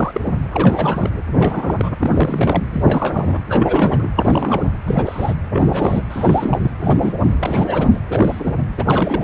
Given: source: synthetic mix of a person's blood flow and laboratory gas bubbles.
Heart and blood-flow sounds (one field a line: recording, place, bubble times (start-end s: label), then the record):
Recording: Doppler ultrasound of blood flow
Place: precordium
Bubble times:
0.00-0.21 s: bubbles
0.25-0.34 s: bubbles
0.52-1.21 s: bubbles
1.34-1.89 s: bubbles
2.01-2.65 s: bubbles
2.72-3.41 s: bubbles
3.49-4.09 s: bubbles
4.15-4.71 s: bubbles
4.86-5.34 s: bubbles
5.53-6.02 s: bubbles
6.10-6.71 s: bubbles
6.78-7.34 s: bubbles
7.40-7.99 s: bubbles
8.09-8.63 s: bubbles
8.77-9.23 s: bubbles
From the record:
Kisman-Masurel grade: 342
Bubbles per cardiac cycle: rolling drumbeat, 9 or more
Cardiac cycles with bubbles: 100%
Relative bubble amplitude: moderate (0.250 to 0.450)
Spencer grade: 3 (all of the cardiac periods contain showers or single bubble signals, but not dominating or overriding the cardiac motion signals)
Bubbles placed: anywhere in the cardiac cycle